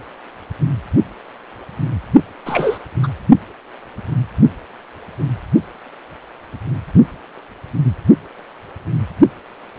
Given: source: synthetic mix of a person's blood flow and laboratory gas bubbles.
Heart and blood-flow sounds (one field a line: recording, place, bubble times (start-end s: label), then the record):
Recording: Doppler ultrasound of blood flow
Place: precordium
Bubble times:
2.46-2.79 s: bubbles
3.03-3.08 s: bubbles
From the record:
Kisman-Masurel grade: 113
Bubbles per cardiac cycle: 1 to 2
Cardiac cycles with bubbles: 1 to 10%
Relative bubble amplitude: loud (0.450 to 0.775)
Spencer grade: 1 (occasional bubble signal discernible with the cardiac motion signal, with majority of cardiac periods free of bubbles)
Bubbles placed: only in the low amplitude regions of the cardiac cycle